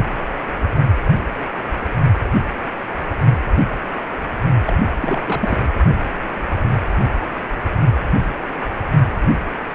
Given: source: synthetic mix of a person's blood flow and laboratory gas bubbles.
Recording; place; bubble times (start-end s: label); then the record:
Doppler ultrasound of blood flow; precordium
4.66-4.73 s: bubbles
5.00-5.21 s: bubbles
5.25-5.58 s: bubbles
From the record:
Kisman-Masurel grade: 222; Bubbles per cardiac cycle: several, 3 to 8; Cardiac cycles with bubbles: 10 to 50%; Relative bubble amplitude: moderate (0.250 to 0.450); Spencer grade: 2 (many but less than half of the cardiac periods contain bubble signals, singularly or in groups); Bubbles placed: only in the low amplitude regions of the cardiac cycle